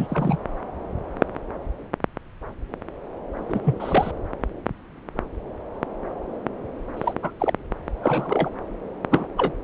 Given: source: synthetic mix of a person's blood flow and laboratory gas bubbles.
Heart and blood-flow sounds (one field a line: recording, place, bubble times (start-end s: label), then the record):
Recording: Doppler ultrasound of blood flow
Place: subclavian vein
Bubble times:
0.00-0.38 s: bubbles
3.38-3.60 s: bubbles
3.65-4.11 s: bubbles
6.96-7.13 s: bubbles
7.22-7.30 s: bubbles
7.39-7.54 s: bubbles
8.02-8.49 s: bubbles
9.11-9.27 s: bubbles
9.38-9.53 s: bubbles
From the record:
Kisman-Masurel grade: 222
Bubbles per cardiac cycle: several, 3 to 8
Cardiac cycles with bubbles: 10 to 50%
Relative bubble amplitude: moderate (0.250 to 0.450)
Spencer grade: 2 (many but less than half of the cardiac periods contain bubble signals, singularly or in groups)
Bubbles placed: anywhere in the cardiac cycle